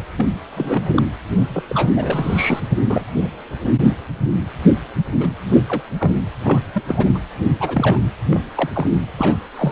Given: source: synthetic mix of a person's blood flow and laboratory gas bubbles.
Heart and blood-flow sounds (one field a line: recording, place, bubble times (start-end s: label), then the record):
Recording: Doppler ultrasound of blood flow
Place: precordium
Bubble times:
0.17-0.26 s: bubbles
0.50-0.90 s: bubbles
0.96-1.02 s: bubbles
1.54-1.63 s: bubbles
1.69-1.92 s: bubbles
1.96-2.61 s: bubbles
2.90-3.04 s: bubbles
3.64-3.71 s: bubbles
4.21-4.35 s: bubbles
5.20-5.28 s: bubbles
5.46-5.63 s: bubbles
5.68-5.81 s: bubbles
6.00-6.12 s: bubbles
6.43-6.62 s: bubbles
6.74-6.83 s: bubbles
6.88-7.09 s: bubbles
7.14-7.18 s: bubbles
7.59-7.99 s: bubbles
8.31-8.41 s: bubbles
8.55-8.70 s: bubbles
8.74-8.95 s: bubbles
9.17-9.38 s: bubbles
9.54-9.72 s: bubbles
From the record:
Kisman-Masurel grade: 242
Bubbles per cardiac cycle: several, 3 to 8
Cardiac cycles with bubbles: 100%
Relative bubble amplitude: moderate (0.250 to 0.450)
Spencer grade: 3 (all of the cardiac periods contain showers or single bubble signals, but not dominating or overriding the cardiac motion signals)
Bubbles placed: anywhere in the cardiac cycle